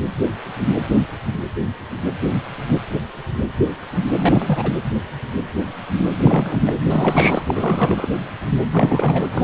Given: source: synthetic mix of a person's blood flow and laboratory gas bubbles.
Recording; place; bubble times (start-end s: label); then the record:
Doppler ultrasound of blood flow; precordium
4.15-4.71 s: bubbles
6.16-6.59 s: bubbles
6.67-6.80 s: bubbles
6.85-7.42 s: bubbles
7.46-8.07 s: bubbles
8.73-9.29 s: bubbles
9.33-9.44 s: bubbles
From the record:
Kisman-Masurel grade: 332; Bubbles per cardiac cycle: rolling drumbeat, 9 or more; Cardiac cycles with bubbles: 50 to 99%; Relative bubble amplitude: moderate (0.250 to 0.450); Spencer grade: 3 (all of the cardiac periods contain showers or single bubble signals, but not dominating or overriding the cardiac motion signals); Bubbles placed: anywhere in the cardiac cycle